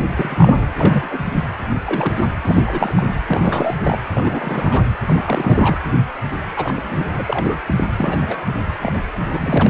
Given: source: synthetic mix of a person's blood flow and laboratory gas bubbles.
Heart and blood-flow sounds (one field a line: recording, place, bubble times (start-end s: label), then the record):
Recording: Doppler ultrasound of blood flow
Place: precordium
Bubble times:
0.08-0.66 s: bubbles
0.79-1.24 s: bubbles
1.85-2.35 s: bubbles
2.44-2.92 s: bubbles
2.95-3.03 s: bubbles
3.27-3.76 s: bubbles
3.83-3.99 s: bubbles
4.08-4.85 s: bubbles
5.05-5.79 s: bubbles
6.56-7.59 s: bubbles
7.67-7.85 s: bubbles
7.98-8.46 s: bubbles
8.79-8.96 s: bubbles
9.29-9.70 s: bubbles
From the record:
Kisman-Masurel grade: 332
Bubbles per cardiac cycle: rolling drumbeat, 9 or more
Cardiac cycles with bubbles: 50 to 99%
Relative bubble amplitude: moderate (0.250 to 0.450)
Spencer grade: 3 (all of the cardiac periods contain showers or single bubble signals, but not dominating or overriding the cardiac motion signals)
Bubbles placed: anywhere in the cardiac cycle